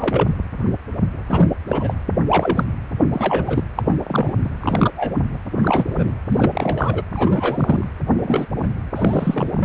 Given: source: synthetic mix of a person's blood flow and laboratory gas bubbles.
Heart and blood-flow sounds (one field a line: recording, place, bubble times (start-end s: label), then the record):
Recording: Doppler ultrasound of blood flow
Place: precordium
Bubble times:
0.00-0.37 s: bubbles
1.26-1.49 s: bubbles
1.68-1.95 s: bubbles
2.29-2.64 s: bubbles
3.12-3.63 s: bubbles
3.77-3.83 s: bubbles
3.87-3.96 s: bubbles
4.04-4.38 s: bubbles
4.44-4.49 s: bubbles
4.60-4.91 s: bubbles
4.96-5.13 s: bubbles
5.61-6.13 s: bubbles
6.29-7.02 s: bubbles
7.13-7.88 s: bubbles
8.18-8.46 s: bubbles
8.58-8.67 s: bubbles
8.96-9.65 s: bubbles
From the record:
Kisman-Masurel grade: 232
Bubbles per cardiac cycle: several, 3 to 8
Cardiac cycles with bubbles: 50 to 99%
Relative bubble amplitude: moderate (0.250 to 0.450)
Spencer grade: 3 (all of the cardiac periods contain showers or single bubble signals, but not dominating or overriding the cardiac motion signals)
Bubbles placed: anywhere in the cardiac cycle